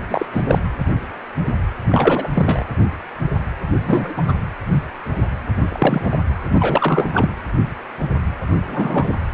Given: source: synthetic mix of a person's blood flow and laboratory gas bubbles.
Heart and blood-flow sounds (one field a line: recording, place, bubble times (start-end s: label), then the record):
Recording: Doppler ultrasound of blood flow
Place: precordium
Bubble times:
0.08-0.26 s: bubbles
0.32-0.42 s: bubbles
0.46-0.60 s: bubbles
1.89-2.29 s: bubbles
2.34-2.64 s: bubbles
3.68-4.33 s: bubbles
5.68-6.18 s: bubbles
6.54-7.30 s: bubbles
8.67-9.13 s: bubbles
From the record:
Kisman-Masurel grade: 233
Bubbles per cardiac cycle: several, 3 to 8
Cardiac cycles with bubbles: 50 to 99%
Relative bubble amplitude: loud (0.450 to 0.775)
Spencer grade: 3 (all of the cardiac periods contain showers or single bubble signals, but not dominating or overriding the cardiac motion signals)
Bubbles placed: anywhere in the cardiac cycle